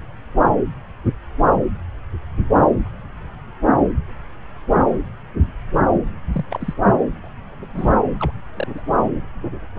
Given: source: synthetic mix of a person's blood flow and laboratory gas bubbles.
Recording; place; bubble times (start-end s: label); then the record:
Doppler ultrasound of blood flow; subclavian vein
6.33-6.45 s: bubbles
6.50-6.74 s: bubbles
7.24-7.28 s: bubbles
7.58-7.99 s: bubbles
8.20-8.31 s: bubbles
8.55-8.67 s: bubbles
8.74-8.81 s: bubbles
From the record:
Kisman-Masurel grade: 221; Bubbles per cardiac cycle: several, 3 to 8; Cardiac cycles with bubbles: 10 to 50%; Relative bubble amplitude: barely perceptible (0.100 to 0.250); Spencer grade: 2 (many but less than half of the cardiac periods contain bubble signals, singularly or in groups); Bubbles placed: anywhere in the cardiac cycle